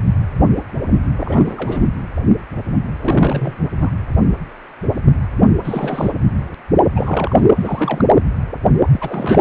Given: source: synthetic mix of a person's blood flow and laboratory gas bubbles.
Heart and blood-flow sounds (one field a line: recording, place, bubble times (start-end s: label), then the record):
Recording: Doppler ultrasound of blood flow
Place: precordium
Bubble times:
1.20-1.91 s: bubbles
3.02-3.56 s: bubbles
3.80-3.92 s: bubbles
5.62-6.12 s: bubbles
6.96-7.49 s: bubbles
7.54-8.09 s: bubbles
8.88-9.41 s: bubbles
From the record:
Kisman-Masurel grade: 332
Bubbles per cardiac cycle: rolling drumbeat, 9 or more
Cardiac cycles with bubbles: 50 to 99%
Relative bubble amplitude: moderate (0.250 to 0.450)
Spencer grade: 3 (all of the cardiac periods contain showers or single bubble signals, but not dominating or overriding the cardiac motion signals)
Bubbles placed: anywhere in the cardiac cycle